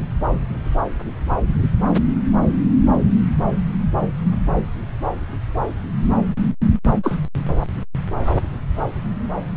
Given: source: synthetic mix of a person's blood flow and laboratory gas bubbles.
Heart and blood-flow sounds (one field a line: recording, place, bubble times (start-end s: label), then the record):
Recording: Doppler ultrasound of blood flow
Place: subclavian vein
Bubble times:
7.03-7.17 s: bubbles
From the record:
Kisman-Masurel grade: 112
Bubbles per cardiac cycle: 1 to 2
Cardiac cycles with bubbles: 1 to 10%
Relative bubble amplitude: moderate (0.250 to 0.450)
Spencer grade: 1 (occasional bubble signal discernible with the cardiac motion signal, with majority of cardiac periods free of bubbles)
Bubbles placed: anywhere in the cardiac cycle